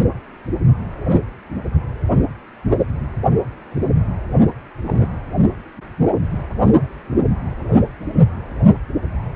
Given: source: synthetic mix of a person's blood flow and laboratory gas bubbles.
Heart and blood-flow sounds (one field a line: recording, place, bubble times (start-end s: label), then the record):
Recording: Doppler ultrasound of blood flow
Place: precordium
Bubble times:
4.84-5.08 s: bubbles
From the record:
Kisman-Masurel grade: 112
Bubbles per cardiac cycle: 1 to 2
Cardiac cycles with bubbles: 1 to 10%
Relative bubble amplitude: moderate (0.250 to 0.450)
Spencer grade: 1 (occasional bubble signal discernible with the cardiac motion signal, with majority of cardiac periods free of bubbles)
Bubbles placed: anywhere in the cardiac cycle